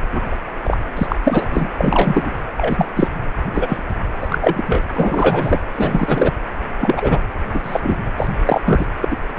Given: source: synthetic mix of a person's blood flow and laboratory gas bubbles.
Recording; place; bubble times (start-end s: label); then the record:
Doppler ultrasound of blood flow; precordium
0.12-0.35 s: bubbles
0.64-0.78 s: bubbles
0.96-1.16 s: bubbles
1.23-1.46 s: bubbles
1.50-1.70 s: bubbles
1.77-2.32 s: bubbles
2.57-2.88 s: bubbles
2.96-3.08 s: bubbles
3.53-3.83 s: bubbles
4.21-4.39 s: bubbles
4.41-4.83 s: bubbles
4.94-5.62 s: bubbles
5.75-6.33 s: bubbles
6.81-7.19 s: bubbles
7.54-7.60 s: bubbles
7.64-7.98 s: bubbles
8.17-8.30 s: bubbles
8.45-8.61 s: bubbles
8.64-8.86 s: bubbles
9.01-9.17 s: bubbles
9.37-9.39 s: bubbles
From the record:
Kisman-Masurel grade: 243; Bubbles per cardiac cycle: several, 3 to 8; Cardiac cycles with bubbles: 100%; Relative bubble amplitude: loud (0.450 to 0.775); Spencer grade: 3 (all of the cardiac periods contain showers or single bubble signals, but not dominating or overriding the cardiac motion signals); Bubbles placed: anywhere in the cardiac cycle